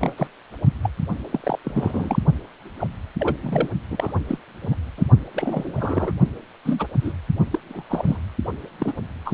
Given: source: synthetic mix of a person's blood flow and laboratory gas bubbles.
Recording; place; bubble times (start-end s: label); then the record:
Doppler ultrasound of blood flow; precordium
0.00-0.15 s: bubbles
0.17-0.27 s: bubbles
0.81-0.90 s: bubbles
1.32-1.40 s: bubbles
1.43-1.58 s: bubbles
1.64-2.19 s: bubbles
2.79-2.88 s: bubbles
3.19-3.35 s: bubbles
3.43-3.68 s: bubbles
3.90-4.12 s: bubbles
4.28-4.38 s: bubbles
4.62-4.75 s: bubbles
4.97-5.04 s: bubbles
5.34-6.12 s: bubbles
6.64-6.86 s: bubbles
7.02-7.12 s: bubbles
7.50-7.59 s: bubbles
7.69-7.83 s: bubbles
7.90-8.18 s: bubbles
8.79-8.93 s: bubbles
9.25-9.34 s: bubbles
From the record:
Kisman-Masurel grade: 242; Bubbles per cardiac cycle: several, 3 to 8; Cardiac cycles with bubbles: 100%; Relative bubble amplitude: moderate (0.250 to 0.450); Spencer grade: 3 (all of the cardiac periods contain showers or single bubble signals, but not dominating or overriding the cardiac motion signals); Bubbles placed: only in the low amplitude regions of the cardiac cycle